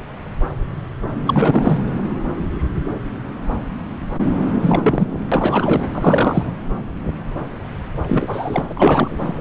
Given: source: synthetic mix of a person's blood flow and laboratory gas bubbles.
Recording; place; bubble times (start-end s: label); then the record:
Doppler ultrasound of blood flow; subclavian vein
1.23-1.79 s: bubbles
4.61-5.07 s: bubbles
5.31-5.87 s: bubbles
5.93-6.50 s: bubbles
8.06-8.72 s: bubbles
8.75-9.34 s: bubbles
From the record:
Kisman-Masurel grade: 333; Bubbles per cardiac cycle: rolling drumbeat, 9 or more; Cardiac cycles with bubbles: 50 to 99%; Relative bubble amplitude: loud (0.450 to 0.775); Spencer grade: 3 (all of the cardiac periods contain showers or single bubble signals, but not dominating or overriding the cardiac motion signals); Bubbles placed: anywhere in the cardiac cycle